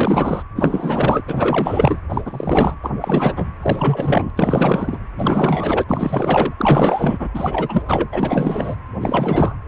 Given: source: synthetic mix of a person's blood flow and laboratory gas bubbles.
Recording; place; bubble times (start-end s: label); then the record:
Doppler ultrasound of blood flow; precordium
0.00-0.42 s: bubbles
0.56-1.23 s: bubbles
1.27-2.00 s: bubbles
2.09-2.21 s: bubbles
2.25-2.76 s: bubbles
2.82-2.92 s: bubbles
3.00-3.52 s: bubbles
3.62-4.30 s: bubbles
4.36-4.98 s: bubbles
5.18-5.84 s: bubbles
5.88-6.54 s: bubbles
6.57-7.29 s: bubbles
7.34-7.83 s: bubbles
7.86-8.09 s: bubbles
8.12-8.75 s: bubbles
9.01-9.57 s: bubbles
9.66-9.68 s: bubbles
From the record:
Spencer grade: 4 (maximum detectable bubble signal sounding continuously throughout systole and diastole of every cardiac period, and overriding the amplitude of the normal cardiac signals); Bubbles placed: anywhere in the cardiac cycle